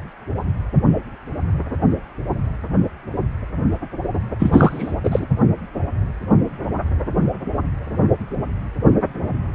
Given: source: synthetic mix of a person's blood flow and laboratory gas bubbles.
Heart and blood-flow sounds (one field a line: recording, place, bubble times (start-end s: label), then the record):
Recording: Doppler ultrasound of blood flow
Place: precordium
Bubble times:
4.39-4.95 s: bubbles
5.03-5.26 s: bubbles
From the record:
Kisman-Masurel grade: 213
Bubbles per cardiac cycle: several, 3 to 8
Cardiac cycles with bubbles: 1 to 10%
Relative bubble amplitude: loud (0.450 to 0.775)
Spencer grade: 1 (occasional bubble signal discernible with the cardiac motion signal, with majority of cardiac periods free of bubbles)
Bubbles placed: anywhere in the cardiac cycle